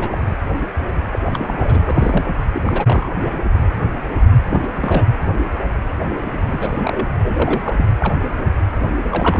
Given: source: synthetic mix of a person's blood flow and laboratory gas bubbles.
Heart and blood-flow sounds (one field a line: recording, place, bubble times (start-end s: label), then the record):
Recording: Doppler ultrasound of blood flow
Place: precordium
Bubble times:
0.00-0.17 s: bubbles
1.12-1.19 s: bubbles
1.26-2.35 s: bubbles
2.40-2.46 s: bubbles
2.52-2.63 s: bubbles
2.66-3.11 s: bubbles
4.50-4.70 s: bubbles
4.73-5.06 s: bubbles
6.10-6.21 s: bubbles
6.45-7.08 s: bubbles
7.23-7.86 s: bubbles
8.00-8.13 s: bubbles
9.11-9.40 s: bubbles
From the record:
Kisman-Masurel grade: 332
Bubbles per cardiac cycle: rolling drumbeat, 9 or more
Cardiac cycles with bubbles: 50 to 99%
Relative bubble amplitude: moderate (0.250 to 0.450)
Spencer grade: 3 (all of the cardiac periods contain showers or single bubble signals, but not dominating or overriding the cardiac motion signals)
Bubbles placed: anywhere in the cardiac cycle